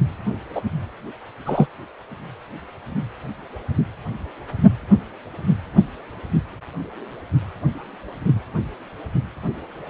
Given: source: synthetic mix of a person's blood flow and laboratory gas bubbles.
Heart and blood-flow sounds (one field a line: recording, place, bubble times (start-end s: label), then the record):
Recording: Doppler ultrasound of blood flow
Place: precordium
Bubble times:
0.55-0.61 s: bubbles
1.46-1.67 s: bubbles
From the record:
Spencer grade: 1 (occasional bubble signal discernible with the cardiac motion signal, with majority of cardiac periods free of bubbles)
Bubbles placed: anywhere in the cardiac cycle